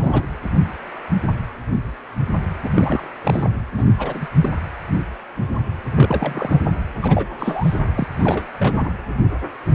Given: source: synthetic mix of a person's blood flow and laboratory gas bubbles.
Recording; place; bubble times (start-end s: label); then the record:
Doppler ultrasound of blood flow; precordium
0.00-0.26 s: bubbles
2.63-3.10 s: bubbles
3.24-3.50 s: bubbles
3.78-3.95 s: bubbles
3.98-4.27 s: bubbles
4.41-4.50 s: bubbles
5.92-6.59 s: bubbles
7.01-7.35 s: bubbles
7.38-7.80 s: bubbles
7.97-8.04 s: bubbles
8.15-8.43 s: bubbles
8.59-8.94 s: bubbles
From the record:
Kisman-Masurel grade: 332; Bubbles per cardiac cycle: rolling drumbeat, 9 or more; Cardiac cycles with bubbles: 50 to 99%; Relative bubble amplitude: moderate (0.250 to 0.450); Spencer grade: 3 (all of the cardiac periods contain showers or single bubble signals, but not dominating or overriding the cardiac motion signals); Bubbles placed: anywhere in the cardiac cycle